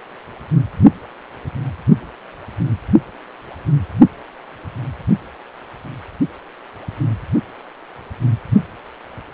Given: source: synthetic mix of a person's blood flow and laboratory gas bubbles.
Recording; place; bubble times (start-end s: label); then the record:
Doppler ultrasound of blood flow; precordium
no bubbles
From the record:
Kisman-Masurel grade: 000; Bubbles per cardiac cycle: 0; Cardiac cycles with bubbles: 0%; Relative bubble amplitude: no bubbles discernible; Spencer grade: 0 (complete lack of bubble signals)